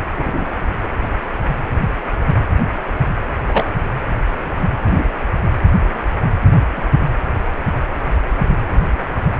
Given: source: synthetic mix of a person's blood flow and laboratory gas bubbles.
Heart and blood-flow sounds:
Doppler ultrasound of blood flow; precordium
0.17-0.46 s: bubbles
3.48-3.72 s: bubbles
4.86-5.04 s: bubbles
6.76-6.82 s: bubbles
From the record:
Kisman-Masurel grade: 122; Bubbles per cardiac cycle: 1 to 2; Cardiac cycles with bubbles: 10 to 50%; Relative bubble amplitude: moderate (0.250 to 0.450); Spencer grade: 2 (many but less than half of the cardiac periods contain bubble signals, singularly or in groups); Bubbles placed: anywhere in the cardiac cycle

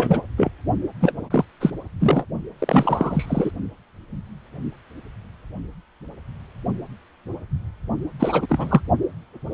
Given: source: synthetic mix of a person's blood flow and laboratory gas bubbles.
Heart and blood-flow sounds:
Doppler ultrasound of blood flow; precordium
0.00-0.23 s: bubbles
0.37-0.50 s: bubbles
1.01-1.13 s: bubbles
1.30-1.45 s: bubbles
1.60-1.71 s: bubbles
1.99-2.25 s: bubbles
2.59-3.51 s: bubbles
8.19-8.81 s: bubbles
From the record:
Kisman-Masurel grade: 333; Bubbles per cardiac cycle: rolling drumbeat, 9 or more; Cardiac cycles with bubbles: 50 to 99%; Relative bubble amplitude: loud (0.450 to 0.775); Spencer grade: 3 (all of the cardiac periods contain showers or single bubble signals, but not dominating or overriding the cardiac motion signals); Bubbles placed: only in the low amplitude regions of the cardiac cycle

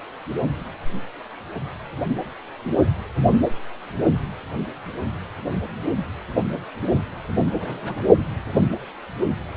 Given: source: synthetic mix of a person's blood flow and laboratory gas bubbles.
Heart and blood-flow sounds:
Doppler ultrasound of blood flow; precordium
7.59-8.04 s: bubbles
From the record:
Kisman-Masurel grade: 211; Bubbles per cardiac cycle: several, 3 to 8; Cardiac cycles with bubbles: 1 to 10%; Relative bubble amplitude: barely perceptible (0.100 to 0.250); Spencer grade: 1 (occasional bubble signal discernible with the cardiac motion signal, with majority of cardiac periods free of bubbles); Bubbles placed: anywhere in the cardiac cycle

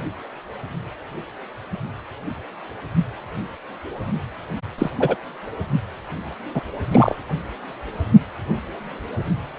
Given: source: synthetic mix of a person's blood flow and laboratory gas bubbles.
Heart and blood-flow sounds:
Doppler ultrasound of blood flow; precordium
4.78-4.91 s: bubbles
5.00-5.16 s: bubbles
6.54-6.62 s: bubbles
6.91-7.15 s: bubbles
From the record:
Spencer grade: 2 (many but less than half of the cardiac periods contain bubble signals, singularly or in groups); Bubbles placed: anywhere in the cardiac cycle

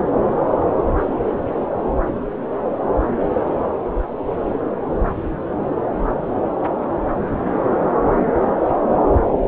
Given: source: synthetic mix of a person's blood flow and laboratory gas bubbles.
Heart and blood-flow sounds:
Doppler ultrasound of blood flow; subclavian vein
no bubbles
From the record:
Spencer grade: 0 (complete lack of bubble signals)

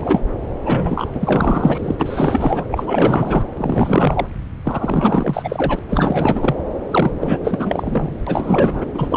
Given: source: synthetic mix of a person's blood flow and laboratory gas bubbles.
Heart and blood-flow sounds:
Doppler ultrasound of blood flow; subclavian vein
0.00-0.19 s: bubbles
0.65-1.11 s: bubbles
1.15-1.95 s: bubbles
1.98-2.66 s: bubbles
2.71-3.43 s: bubbles
3.57-4.26 s: bubbles
4.64-5.79 s: bubbles
5.88-6.55 s: bubbles
6.90-7.11 s: bubbles
7.21-8.16 s: bubbles
8.26-8.86 s: bubbles
8.94-9.17 s: bubbles
From the record:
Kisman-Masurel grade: 444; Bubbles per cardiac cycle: continuous sound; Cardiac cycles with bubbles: 100%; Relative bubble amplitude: maximal (0.775 to 0.999); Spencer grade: 4 (maximum detectable bubble signal sounding continuously throughout systole and diastole of every cardiac period, and overriding the amplitude of the normal cardiac signals); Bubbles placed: anywhere in the cardiac cycle

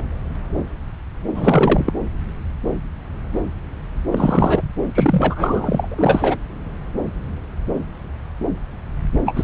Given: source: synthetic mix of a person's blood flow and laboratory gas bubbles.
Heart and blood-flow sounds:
Doppler ultrasound of blood flow; subclavian vein
0.00-0.03 s: bubbles
1.34-1.93 s: bubbles
4.11-4.62 s: bubbles
4.95-5.88 s: bubbles
5.91-6.37 s: bubbles
9.26-9.44 s: bubbles
From the record:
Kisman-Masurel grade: 333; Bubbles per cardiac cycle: rolling drumbeat, 9 or more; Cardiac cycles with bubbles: 50 to 99%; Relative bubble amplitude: loud (0.450 to 0.775); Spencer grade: 3 (all of the cardiac periods contain showers or single bubble signals, but not dominating or overriding the cardiac motion signals); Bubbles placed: anywhere in the cardiac cycle

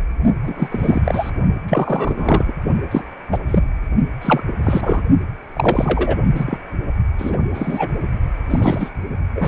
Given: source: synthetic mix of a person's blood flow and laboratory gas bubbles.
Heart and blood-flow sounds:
Doppler ultrasound of blood flow; precordium
0.44-1.01 s: bubbles
1.04-1.31 s: bubbles
1.68-2.44 s: bubbles
2.48-2.54 s: bubbles
2.91-3.02 s: bubbles
3.31-3.38 s: bubbles
3.48-3.65 s: bubbles
4.21-4.43 s: bubbles
4.46-4.53 s: bubbles
4.63-5.00 s: bubbles
5.54-6.17 s: bubbles
6.34-6.58 s: bubbles
7.18-7.37 s: bubbles
7.54-7.94 s: bubbles
8.50-8.90 s: bubbles
9.35-9.48 s: bubbles
From the record:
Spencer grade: 3 (all of the cardiac periods contain showers or single bubble signals, but not dominating or overriding the cardiac motion signals); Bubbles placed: only in the low amplitude regions of the cardiac cycle

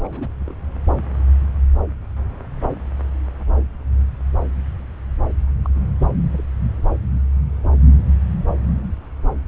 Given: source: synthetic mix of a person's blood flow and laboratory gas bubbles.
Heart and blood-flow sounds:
Doppler ultrasound of blood flow; subclavian vein
0.04-0.30 s: bubbles
0.40-0.54 s: bubbles
5.63-5.70 s: bubbles
5.99-6.08 s: bubbles
6.33-6.43 s: bubbles
From the record:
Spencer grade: 2 (many but less than half of the cardiac periods contain bubble signals, singularly or in groups); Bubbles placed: anywhere in the cardiac cycle

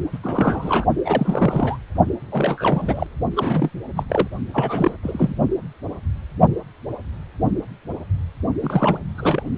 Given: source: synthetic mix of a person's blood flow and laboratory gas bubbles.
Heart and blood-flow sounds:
Doppler ultrasound of blood flow; precordium
0.12-0.18 s: bubbles
0.23-0.85 s: bubbles
1.04-1.78 s: bubbles
2.31-3.06 s: bubbles
3.36-3.70 s: bubbles
3.96-4.03 s: bubbles
4.09-4.28 s: bubbles
4.54-4.96 s: bubbles
5.03-5.34 s: bubbles
8.60-8.99 s: bubbles
9.18-9.43 s: bubbles
From the record:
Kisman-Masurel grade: 332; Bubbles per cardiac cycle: rolling drumbeat, 9 or more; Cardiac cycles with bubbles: 50 to 99%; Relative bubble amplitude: moderate (0.250 to 0.450); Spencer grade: 3 (all of the cardiac periods contain showers or single bubble signals, but not dominating or overriding the cardiac motion signals); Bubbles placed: only in the low amplitude regions of the cardiac cycle

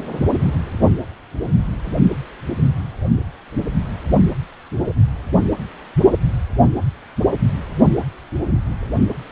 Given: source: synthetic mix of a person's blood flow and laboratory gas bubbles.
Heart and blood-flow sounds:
Doppler ultrasound of blood flow; precordium
9.09-9.13 s: bubbles
From the record:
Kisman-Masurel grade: 112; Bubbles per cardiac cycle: 1 to 2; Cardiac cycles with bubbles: 1 to 10%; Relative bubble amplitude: moderate (0.250 to 0.450); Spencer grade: 1 (occasional bubble signal discernible with the cardiac motion signal, with majority of cardiac periods free of bubbles); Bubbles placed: only in the low amplitude regions of the cardiac cycle

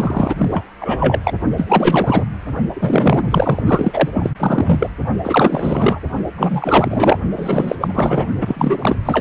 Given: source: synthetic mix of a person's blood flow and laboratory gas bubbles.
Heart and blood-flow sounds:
Doppler ultrasound of blood flow; precordium
0.00-0.35 s: bubbles
0.37-0.64 s: bubbles
0.81-1.20 s: bubbles
1.23-1.32 s: bubbles
1.57-2.24 s: bubbles
2.74-3.62 s: bubbles
3.66-4.09 s: bubbles
4.13-4.30 s: bubbles
4.39-4.92 s: bubbles
5.24-6.00 s: bubbles
6.38-7.18 s: bubbles
7.36-7.75 s: bubbles
7.80-8.27 s: bubbles
8.40-8.96 s: bubbles
9.05-9.21 s: bubbles
From the record:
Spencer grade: 4 (maximum detectable bubble signal sounding continuously throughout systole and diastole of every cardiac period, and overriding the amplitude of the normal cardiac signals); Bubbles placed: only in the low amplitude regions of the cardiac cycle

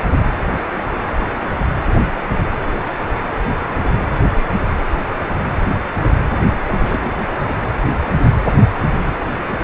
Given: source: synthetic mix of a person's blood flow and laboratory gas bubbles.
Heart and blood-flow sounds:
Doppler ultrasound of blood flow; precordium
6.67-7.23 s: bubbles
From the record:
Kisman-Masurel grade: 211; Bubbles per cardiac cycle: several, 3 to 8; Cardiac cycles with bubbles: 1 to 10%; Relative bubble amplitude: barely perceptible (0.100 to 0.250); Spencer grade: 1 (occasional bubble signal discernible with the cardiac motion signal, with majority of cardiac periods free of bubbles); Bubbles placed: anywhere in the cardiac cycle

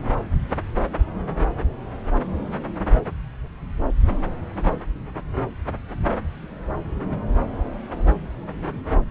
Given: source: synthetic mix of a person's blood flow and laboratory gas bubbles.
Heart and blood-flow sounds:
Doppler ultrasound of blood flow; subclavian vein
no bubbles
From the record:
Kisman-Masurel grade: 000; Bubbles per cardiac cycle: 0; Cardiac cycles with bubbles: 0%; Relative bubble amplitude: no bubbles discernible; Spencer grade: 0 (complete lack of bubble signals)

